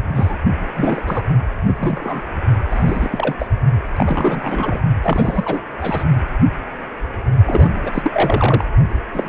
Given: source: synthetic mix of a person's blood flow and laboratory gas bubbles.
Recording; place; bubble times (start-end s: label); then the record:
Doppler ultrasound of blood flow; precordium
0.14-0.37 s: bubbles
0.76-1.27 s: bubbles
1.62-2.21 s: bubbles
2.70-3.36 s: bubbles
3.38-3.50 s: bubbles
3.96-4.79 s: bubbles
5.02-5.62 s: bubbles
5.77-6.04 s: bubbles
7.46-7.80 s: bubbles
7.83-8.65 s: bubbles
9.13-9.29 s: bubbles
From the record:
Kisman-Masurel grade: 332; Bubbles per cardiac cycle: rolling drumbeat, 9 or more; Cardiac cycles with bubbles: 50 to 99%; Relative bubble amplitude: moderate (0.250 to 0.450); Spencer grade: 3 (all of the cardiac periods contain showers or single bubble signals, but not dominating or overriding the cardiac motion signals); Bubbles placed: only in the low amplitude regions of the cardiac cycle